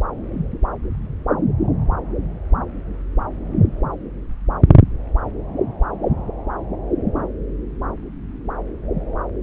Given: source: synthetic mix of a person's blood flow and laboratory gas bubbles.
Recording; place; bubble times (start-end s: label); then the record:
Doppler ultrasound of blood flow; subclavian vein
no bubbles
From the record:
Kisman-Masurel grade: 000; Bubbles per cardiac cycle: 0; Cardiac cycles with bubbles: 0%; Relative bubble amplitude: no bubbles discernible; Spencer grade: 0 (complete lack of bubble signals)